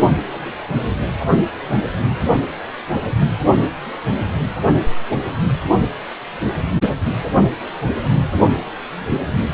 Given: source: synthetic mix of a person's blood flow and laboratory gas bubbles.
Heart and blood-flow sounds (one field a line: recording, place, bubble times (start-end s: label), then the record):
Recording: Doppler ultrasound of blood flow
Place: precordium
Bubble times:
0.31-0.55 s: bubbles
0.99-1.06 s: bubbles
From the record:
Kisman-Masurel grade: 121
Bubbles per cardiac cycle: 1 to 2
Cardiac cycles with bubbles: 10 to 50%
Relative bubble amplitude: barely perceptible (0.100 to 0.250)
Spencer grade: 2 (many but less than half of the cardiac periods contain bubble signals, singularly or in groups)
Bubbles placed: only in the low amplitude regions of the cardiac cycle